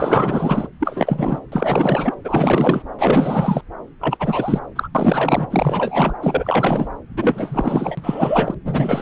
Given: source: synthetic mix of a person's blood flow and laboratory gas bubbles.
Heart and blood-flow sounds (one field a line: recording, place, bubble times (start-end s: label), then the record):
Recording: Doppler ultrasound of blood flow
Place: subclavian vein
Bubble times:
0.00-0.68 s: bubbles
0.79-1.41 s: bubbles
1.51-2.15 s: bubbles
2.24-2.83 s: bubbles
2.99-3.62 s: bubbles
4.00-4.60 s: bubbles
4.75-4.88 s: bubbles
4.94-5.47 s: bubbles
5.50-6.13 s: bubbles
6.21-6.88 s: bubbles
7.17-8.54 s: bubbles
8.64-9.02 s: bubbles
From the record:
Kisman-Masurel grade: 444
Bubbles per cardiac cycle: continuous sound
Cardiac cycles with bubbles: 100%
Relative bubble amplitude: maximal (0.775 to 0.999)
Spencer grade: 4 (maximum detectable bubble signal sounding continuously throughout systole and diastole of every cardiac period, and overriding the amplitude of the normal cardiac signals)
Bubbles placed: anywhere in the cardiac cycle